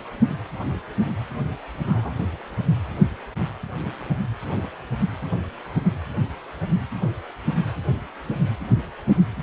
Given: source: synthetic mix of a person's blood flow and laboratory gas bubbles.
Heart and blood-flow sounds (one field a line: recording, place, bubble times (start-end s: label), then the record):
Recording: Doppler ultrasound of blood flow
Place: precordium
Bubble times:
1.86-2.12 s: bubbles
From the record:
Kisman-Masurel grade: 121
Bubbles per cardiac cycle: 1 to 2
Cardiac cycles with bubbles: 10 to 50%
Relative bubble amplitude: barely perceptible (0.100 to 0.250)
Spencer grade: 2 (many but less than half of the cardiac periods contain bubble signals, singularly or in groups)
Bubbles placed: anywhere in the cardiac cycle